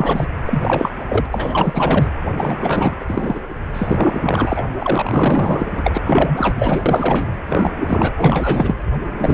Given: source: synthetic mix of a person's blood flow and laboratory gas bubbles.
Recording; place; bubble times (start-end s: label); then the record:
Doppler ultrasound of blood flow; precordium
0.00-0.27 s: bubbles
0.45-1.05 s: bubbles
1.08-1.26 s: bubbles
1.31-2.10 s: bubbles
2.37-2.95 s: bubbles
3.00-3.40 s: bubbles
3.73-4.63 s: bubbles
4.78-5.71 s: bubbles
5.75-6.02 s: bubbles
6.05-6.82 s: bubbles
6.85-7.35 s: bubbles
7.49-7.73 s: bubbles
7.77-8.77 s: bubbles
9.18-9.34 s: bubbles
From the record:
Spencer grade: 4 (maximum detectable bubble signal sounding continuously throughout systole and diastole of every cardiac period, and overriding the amplitude of the normal cardiac signals); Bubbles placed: anywhere in the cardiac cycle